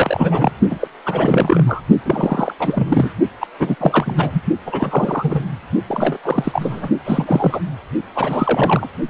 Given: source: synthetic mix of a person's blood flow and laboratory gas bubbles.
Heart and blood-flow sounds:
Doppler ultrasound of blood flow; precordium
0.00-0.51 s: bubbles
0.71-0.88 s: bubbles
1.06-1.64 s: bubbles
1.67-1.81 s: bubbles
2.05-2.54 s: bubbles
2.59-3.10 s: bubbles
3.40-3.47 s: bubbles
3.59-3.75 s: bubbles
3.79-4.41 s: bubbles
4.66-5.41 s: bubbles
5.88-6.17 s: bubbles
6.23-6.89 s: bubbles
7.05-7.60 s: bubbles
8.14-8.88 s: bubbles
9.08-9.10 s: bubbles
From the record:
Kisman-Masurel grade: 343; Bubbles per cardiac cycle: rolling drumbeat, 9 or more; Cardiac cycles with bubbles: 100%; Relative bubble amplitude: loud (0.450 to 0.775); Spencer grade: 3 (all of the cardiac periods contain showers or single bubble signals, but not dominating or overriding the cardiac motion signals); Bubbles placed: only in the low amplitude regions of the cardiac cycle

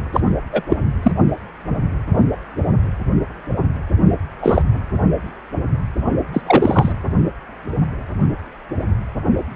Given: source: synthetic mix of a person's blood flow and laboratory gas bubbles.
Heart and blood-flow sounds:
Doppler ultrasound of blood flow; precordium
0.12-0.21 s: bubbles
0.52-0.62 s: bubbles
0.69-0.76 s: bubbles
1.02-1.11 s: bubbles
4.42-4.62 s: bubbles
6.32-6.41 s: bubbles
6.46-6.92 s: bubbles
From the record:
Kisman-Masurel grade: 223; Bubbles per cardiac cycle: several, 3 to 8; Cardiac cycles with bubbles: 10 to 50%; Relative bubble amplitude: loud (0.450 to 0.775); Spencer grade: 2 (many but less than half of the cardiac periods contain bubble signals, singularly or in groups); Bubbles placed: only in the low amplitude regions of the cardiac cycle

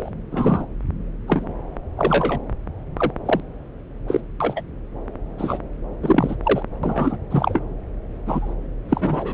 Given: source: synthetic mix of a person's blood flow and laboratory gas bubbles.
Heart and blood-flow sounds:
Doppler ultrasound of blood flow; subclavian vein
0.00-0.10 s: bubbles
0.32-0.66 s: bubbles
1.27-1.45 s: bubbles
1.97-2.40 s: bubbles
2.97-3.12 s: bubbles
3.25-3.40 s: bubbles
4.08-4.21 s: bubbles
4.40-4.61 s: bubbles
5.38-5.58 s: bubbles
6.03-6.36 s: bubbles
6.44-6.62 s: bubbles
6.83-7.17 s: bubbles
7.31-7.60 s: bubbles
8.26-8.54 s: bubbles
8.89-9.34 s: bubbles
From the record:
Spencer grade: 3 (all of the cardiac periods contain showers or single bubble signals, but not dominating or overriding the cardiac motion signals); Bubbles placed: anywhere in the cardiac cycle

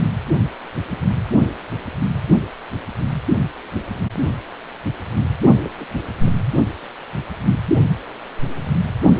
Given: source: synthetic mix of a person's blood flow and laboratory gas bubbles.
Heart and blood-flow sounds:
Doppler ultrasound of blood flow; precordium
5.63-5.69 s: bubbles
5.78-5.86 s: bubbles
6.20-6.32 s: bubbles
From the record:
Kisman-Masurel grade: 211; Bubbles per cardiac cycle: several, 3 to 8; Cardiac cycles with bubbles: 1 to 10%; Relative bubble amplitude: barely perceptible (0.100 to 0.250); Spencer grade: 1 (occasional bubble signal discernible with the cardiac motion signal, with majority of cardiac periods free of bubbles); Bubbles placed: only in the low amplitude regions of the cardiac cycle

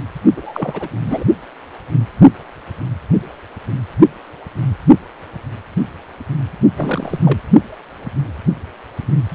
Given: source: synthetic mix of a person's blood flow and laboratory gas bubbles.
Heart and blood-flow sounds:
Doppler ultrasound of blood flow; precordium
0.36-0.88 s: bubbles
1.05-1.24 s: bubbles
6.76-7.40 s: bubbles
From the record:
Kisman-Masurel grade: 222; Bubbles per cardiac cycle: several, 3 to 8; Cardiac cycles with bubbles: 10 to 50%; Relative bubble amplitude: moderate (0.250 to 0.450); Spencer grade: 2 (many but less than half of the cardiac periods contain bubble signals, singularly or in groups); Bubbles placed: only in the low amplitude regions of the cardiac cycle

